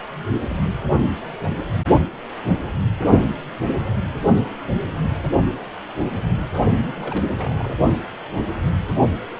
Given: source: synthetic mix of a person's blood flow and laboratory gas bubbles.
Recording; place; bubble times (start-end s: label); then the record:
Doppler ultrasound of blood flow; precordium
7.00-7.29 s: bubbles
7.38-7.74 s: bubbles
From the record:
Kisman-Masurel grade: 211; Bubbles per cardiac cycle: several, 3 to 8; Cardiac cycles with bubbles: 1 to 10%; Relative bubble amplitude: barely perceptible (0.100 to 0.250); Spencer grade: 1 (occasional bubble signal discernible with the cardiac motion signal, with majority of cardiac periods free of bubbles); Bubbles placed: only in the low amplitude regions of the cardiac cycle